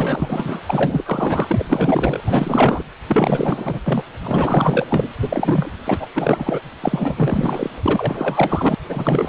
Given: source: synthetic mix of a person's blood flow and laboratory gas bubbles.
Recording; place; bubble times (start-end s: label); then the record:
Doppler ultrasound of blood flow; precordium
0.00-0.60 s: bubbles
0.66-2.21 s: bubbles
2.24-2.83 s: bubbles
3.08-3.79 s: bubbles
3.84-4.03 s: bubbles
4.23-4.87 s: bubbles
4.90-5.13 s: bubbles
5.23-5.71 s: bubbles
5.84-6.08 s: bubbles
6.10-6.61 s: bubbles
6.80-7.69 s: bubbles
7.82-8.75 s: bubbles
8.88-9.28 s: bubbles
From the record:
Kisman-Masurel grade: 444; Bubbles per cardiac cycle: continuous sound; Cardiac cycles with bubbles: 100%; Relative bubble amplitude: maximal (0.775 to 0.999); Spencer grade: 4 (maximum detectable bubble signal sounding continuously throughout systole and diastole of every cardiac period, and overriding the amplitude of the normal cardiac signals); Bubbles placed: anywhere in the cardiac cycle